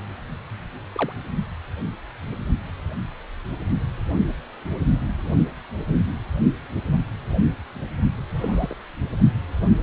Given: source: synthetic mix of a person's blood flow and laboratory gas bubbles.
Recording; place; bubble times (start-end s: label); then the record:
Doppler ultrasound of blood flow; precordium
0.92-1.12 s: bubbles
8.35-8.74 s: bubbles
From the record:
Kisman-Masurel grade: 121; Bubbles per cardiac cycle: 1 to 2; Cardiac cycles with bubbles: 10 to 50%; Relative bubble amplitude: barely perceptible (0.100 to 0.250); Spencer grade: 2 (many but less than half of the cardiac periods contain bubble signals, singularly or in groups); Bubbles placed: only in the low amplitude regions of the cardiac cycle